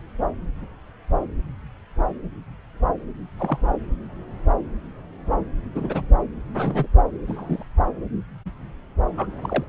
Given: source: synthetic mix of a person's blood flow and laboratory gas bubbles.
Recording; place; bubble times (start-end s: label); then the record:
Doppler ultrasound of blood flow; subclavian vein
3.38-3.58 s: bubbles
5.75-6.02 s: bubbles
6.54-6.87 s: bubbles
7.27-7.64 s: bubbles
9.17-9.27 s: bubbles
9.42-9.64 s: bubbles
From the record:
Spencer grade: 2 (many but less than half of the cardiac periods contain bubble signals, singularly or in groups); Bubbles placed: anywhere in the cardiac cycle